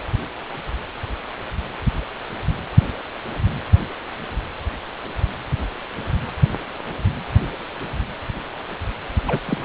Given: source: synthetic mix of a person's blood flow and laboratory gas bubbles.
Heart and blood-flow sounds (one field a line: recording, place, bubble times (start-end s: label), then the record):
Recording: Doppler ultrasound of blood flow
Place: precordium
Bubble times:
9.27-9.40 s: bubbles
9.46-9.57 s: bubbles
9.62-9.65 s: bubbles
From the record:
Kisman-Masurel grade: 212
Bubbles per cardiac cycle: several, 3 to 8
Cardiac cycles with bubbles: 1 to 10%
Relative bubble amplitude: moderate (0.250 to 0.450)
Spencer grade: 1 (occasional bubble signal discernible with the cardiac motion signal, with majority of cardiac periods free of bubbles)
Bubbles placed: anywhere in the cardiac cycle